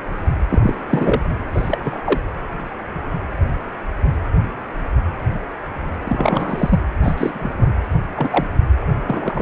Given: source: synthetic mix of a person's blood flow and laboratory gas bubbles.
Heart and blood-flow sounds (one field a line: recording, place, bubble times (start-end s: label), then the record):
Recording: Doppler ultrasound of blood flow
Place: precordium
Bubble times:
0.49-0.75 s: bubbles
0.88-1.29 s: bubbles
1.52-1.78 s: bubbles
1.83-1.98 s: bubbles
2.04-2.21 s: bubbles
6.04-6.85 s: bubbles
7.03-7.73 s: bubbles
8.16-8.46 s: bubbles
9.06-9.42 s: bubbles
From the record:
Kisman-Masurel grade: 222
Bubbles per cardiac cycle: several, 3 to 8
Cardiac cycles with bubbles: 10 to 50%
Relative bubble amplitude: moderate (0.250 to 0.450)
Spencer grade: 2 (many but less than half of the cardiac periods contain bubble signals, singularly or in groups)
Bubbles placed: anywhere in the cardiac cycle